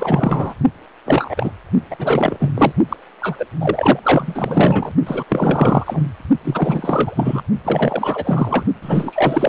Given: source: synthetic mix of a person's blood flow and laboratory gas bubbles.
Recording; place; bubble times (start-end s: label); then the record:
Doppler ultrasound of blood flow; precordium
0.00-0.53 s: bubbles
1.05-1.52 s: bubbles
1.91-2.72 s: bubbles
2.89-2.96 s: bubbles
3.21-3.46 s: bubbles
3.59-4.00 s: bubbles
4.03-4.92 s: bubbles
5.06-5.24 s: bubbles
5.29-6.08 s: bubbles
6.44-7.42 s: bubbles
7.64-8.64 s: bubbles
8.82-9.49 s: bubbles
From the record:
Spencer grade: 4 (maximum detectable bubble signal sounding continuously throughout systole and diastole of every cardiac period, and overriding the amplitude of the normal cardiac signals); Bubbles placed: only in the low amplitude regions of the cardiac cycle